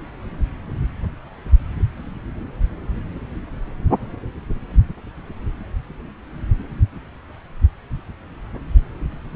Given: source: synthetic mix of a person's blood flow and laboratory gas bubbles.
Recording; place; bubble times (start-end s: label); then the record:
Doppler ultrasound of blood flow; subclavian vein
no bubbles
From the record:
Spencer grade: 0 (complete lack of bubble signals)